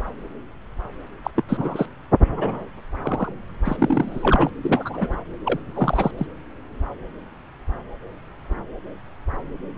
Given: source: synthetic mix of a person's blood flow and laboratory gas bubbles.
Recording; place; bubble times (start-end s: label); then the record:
Doppler ultrasound of blood flow; subclavian vein
1.24-1.30 s: bubbles
1.35-1.44 s: bubbles
1.48-1.86 s: bubbles
2.33-2.62 s: bubbles
3.02-3.32 s: bubbles
3.65-4.50 s: bubbles
4.62-5.16 s: bubbles
5.45-5.59 s: bubbles
5.66-6.11 s: bubbles
6.17-6.27 s: bubbles
From the record:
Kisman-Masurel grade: 232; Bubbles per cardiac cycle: several, 3 to 8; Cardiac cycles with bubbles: 50 to 99%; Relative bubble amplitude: moderate (0.250 to 0.450); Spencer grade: 3 (all of the cardiac periods contain showers or single bubble signals, but not dominating or overriding the cardiac motion signals); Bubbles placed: anywhere in the cardiac cycle